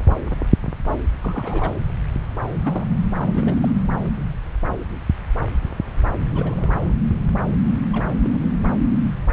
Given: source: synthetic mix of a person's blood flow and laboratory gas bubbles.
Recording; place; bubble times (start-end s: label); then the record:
Doppler ultrasound of blood flow; subclavian vein
1.22-1.74 s: bubbles
2.62-2.84 s: bubbles
3.18-3.72 s: bubbles
6.35-6.93 s: bubbles
7.92-8.06 s: bubbles
8.24-8.51 s: bubbles
From the record:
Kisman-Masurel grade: 221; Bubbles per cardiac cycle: several, 3 to 8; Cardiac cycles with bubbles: 10 to 50%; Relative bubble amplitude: barely perceptible (0.100 to 0.250); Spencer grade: 2 (many but less than half of the cardiac periods contain bubble signals, singularly or in groups); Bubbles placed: anywhere in the cardiac cycle